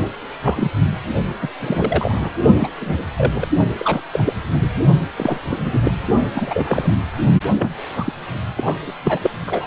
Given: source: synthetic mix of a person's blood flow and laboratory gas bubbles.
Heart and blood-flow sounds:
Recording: Doppler ultrasound of blood flow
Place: precordium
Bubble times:
0.43-0.71 s: bubbles
1.41-1.48 s: bubbles
1.60-2.29 s: bubbles
2.57-2.68 s: bubbles
2.81-3.04 s: bubbles
3.17-3.46 s: bubbles
3.77-4.01 s: bubbles
4.12-4.33 s: bubbles
4.53-4.67 s: bubbles
5.17-5.39 s: bubbles
5.49-5.79 s: bubbles
5.83-5.91 s: bubbles
6.34-6.96 s: bubbles
7.55-7.69 s: bubbles
7.95-8.12 s: bubbles
8.56-8.78 s: bubbles
8.87-8.93 s: bubbles
9.05-9.19 s: bubbles
9.22-9.31 s: bubbles
9.46-9.67 s: bubbles
From the record:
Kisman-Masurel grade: 243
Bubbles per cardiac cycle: several, 3 to 8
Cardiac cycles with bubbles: 100%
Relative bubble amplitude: loud (0.450 to 0.775)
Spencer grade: 3 (all of the cardiac periods contain showers or single bubble signals, but not dominating or overriding the cardiac motion signals)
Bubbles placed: only in the low amplitude regions of the cardiac cycle

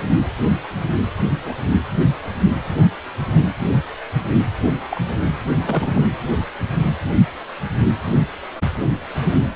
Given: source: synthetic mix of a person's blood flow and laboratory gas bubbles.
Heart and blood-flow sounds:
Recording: Doppler ultrasound of blood flow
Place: precordium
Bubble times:
1.45-1.56 s: bubbles
4.90-5.01 s: bubbles
5.54-6.06 s: bubbles
9.18-9.38 s: bubbles
From the record:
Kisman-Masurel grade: 122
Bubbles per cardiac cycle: 1 to 2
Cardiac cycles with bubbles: 10 to 50%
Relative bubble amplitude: moderate (0.250 to 0.450)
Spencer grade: 2 (many but less than half of the cardiac periods contain bubble signals, singularly or in groups)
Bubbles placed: anywhere in the cardiac cycle

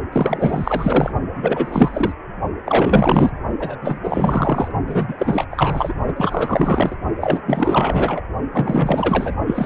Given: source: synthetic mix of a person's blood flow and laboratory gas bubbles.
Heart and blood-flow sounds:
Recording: Doppler ultrasound of blood flow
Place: precordium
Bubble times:
0.12-1.12 s: bubbles
1.35-2.14 s: bubbles
2.66-3.31 s: bubbles
3.60-3.76 s: bubbles
3.82-3.99 s: bubbles
4.04-4.71 s: bubbles
4.87-5.46 s: bubbles
5.50-5.94 s: bubbles
6.06-6.96 s: bubbles
7.21-7.41 s: bubbles
7.45-8.21 s: bubbles
8.52-9.35 s: bubbles
9.46-9.66 s: bubbles
From the record:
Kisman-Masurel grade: 444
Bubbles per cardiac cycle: continuous sound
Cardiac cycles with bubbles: 100%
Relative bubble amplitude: maximal (0.775 to 0.999)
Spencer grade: 4 (maximum detectable bubble signal sounding continuously throughout systole and diastole of every cardiac period, and overriding the amplitude of the normal cardiac signals)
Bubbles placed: only in the low amplitude regions of the cardiac cycle

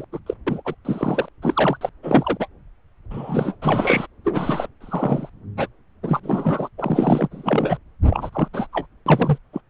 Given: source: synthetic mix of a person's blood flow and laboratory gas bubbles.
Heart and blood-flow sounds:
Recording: Doppler ultrasound of blood flow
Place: subclavian vein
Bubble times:
0.00-0.05 s: bubbles
0.12-0.19 s: bubbles
0.26-0.34 s: bubbles
0.47-0.62 s: bubbles
0.65-0.75 s: bubbles
0.84-1.29 s: bubbles
1.42-1.78 s: bubbles
1.81-1.90 s: bubbles
2.03-2.47 s: bubbles
3.10-3.56 s: bubbles
3.61-4.07 s: bubbles
4.24-4.68 s: bubbles
4.81-5.29 s: bubbles
5.57-5.68 s: bubbles
6.03-6.20 s: bubbles
6.23-6.69 s: bubbles
6.78-7.29 s: bubbles
7.31-7.78 s: bubbles
8.10-8.30 s: bubbles
8.33-8.48 s: bubbles
8.53-8.67 s: bubbles
8.72-8.87 s: bubbles
9.06-9.38 s: bubbles
9.53-9.61 s: bubbles
From the record:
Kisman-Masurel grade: 243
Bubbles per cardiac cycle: several, 3 to 8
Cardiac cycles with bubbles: 100%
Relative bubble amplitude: loud (0.450 to 0.775)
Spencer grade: 3 (all of the cardiac periods contain showers or single bubble signals, but not dominating or overriding the cardiac motion signals)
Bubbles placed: anywhere in the cardiac cycle

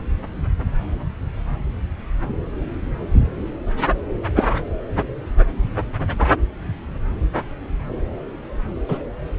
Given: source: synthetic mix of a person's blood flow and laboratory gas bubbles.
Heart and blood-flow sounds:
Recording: Doppler ultrasound of blood flow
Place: subclavian vein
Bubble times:
4.35-4.47 s: bubbles
8.88-8.98 s: bubbles
From the record:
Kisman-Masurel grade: 123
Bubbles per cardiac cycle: 1 to 2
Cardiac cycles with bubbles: 10 to 50%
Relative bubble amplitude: loud (0.450 to 0.775)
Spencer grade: 2 (many but less than half of the cardiac periods contain bubble signals, singularly or in groups)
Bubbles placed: anywhere in the cardiac cycle

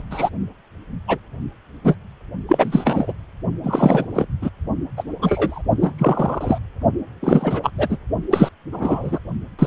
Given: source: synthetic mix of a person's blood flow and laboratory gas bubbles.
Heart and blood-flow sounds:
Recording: Doppler ultrasound of blood flow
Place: precordium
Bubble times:
0.00-0.02 s: bubbles
0.11-0.29 s: bubbles
1.07-1.18 s: bubbles
1.84-1.96 s: bubbles
2.48-3.12 s: bubbles
3.63-4.06 s: bubbles
4.14-4.28 s: bubbles
4.42-4.50 s: bubbles
4.96-5.04 s: bubbles
5.21-5.62 s: bubbles
5.77-6.58 s: bubbles
7.22-7.71 s: bubbles
7.77-7.98 s: bubbles
8.30-8.49 s: bubbles
8.72-9.19 s: bubbles
9.58-9.66 s: bubbles
From the record:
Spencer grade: 3 (all of the cardiac periods contain showers or single bubble signals, but not dominating or overriding the cardiac motion signals)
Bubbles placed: only in the low amplitude regions of the cardiac cycle

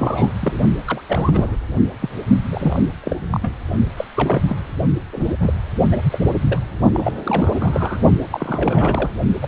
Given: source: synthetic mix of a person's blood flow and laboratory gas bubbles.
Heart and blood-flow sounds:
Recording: Doppler ultrasound of blood flow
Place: precordium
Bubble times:
0.00-0.33 s: bubbles
0.39-0.59 s: bubbles
0.87-1.01 s: bubbles
1.07-1.57 s: bubbles
2.01-2.10 s: bubbles
2.52-2.81 s: bubbles
3.04-3.17 s: bubbles
3.30-3.55 s: bubbles
3.97-4.04 s: bubbles
4.14-4.42 s: bubbles
4.46-4.57 s: bubbles
5.12-5.34 s: bubbles
5.39-5.54 s: bubbles
5.89-5.97 s: bubbles
6.11-6.19 s: bubbles
6.43-6.60 s: bubbles
6.93-8.01 s: bubbles
8.30-9.10 s: bubbles
9.41-9.48 s: bubbles
From the record:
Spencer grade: 3 (all of the cardiac periods contain showers or single bubble signals, but not dominating or overriding the cardiac motion signals)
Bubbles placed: only in the low amplitude regions of the cardiac cycle

